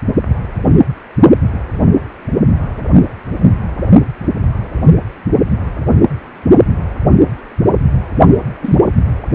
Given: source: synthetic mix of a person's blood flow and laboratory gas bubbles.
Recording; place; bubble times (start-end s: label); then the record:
Doppler ultrasound of blood flow; precordium
8.61-8.76 s: bubbles
From the record:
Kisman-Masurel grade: 112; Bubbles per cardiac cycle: 1 to 2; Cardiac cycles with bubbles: 1 to 10%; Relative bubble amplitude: moderate (0.250 to 0.450); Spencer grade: 1 (occasional bubble signal discernible with the cardiac motion signal, with majority of cardiac periods free of bubbles); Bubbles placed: only in the low amplitude regions of the cardiac cycle